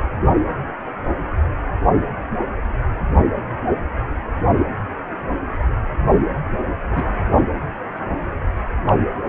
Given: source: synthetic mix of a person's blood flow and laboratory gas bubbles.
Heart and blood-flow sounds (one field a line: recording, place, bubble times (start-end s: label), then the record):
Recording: Doppler ultrasound of blood flow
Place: precordium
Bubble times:
6.91-7.15 s: bubbles
8.86-8.93 s: bubbles
From the record:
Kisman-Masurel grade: 121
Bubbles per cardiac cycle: 1 to 2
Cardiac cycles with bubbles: 10 to 50%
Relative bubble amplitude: barely perceptible (0.100 to 0.250)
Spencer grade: 2 (many but less than half of the cardiac periods contain bubble signals, singularly or in groups)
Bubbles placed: anywhere in the cardiac cycle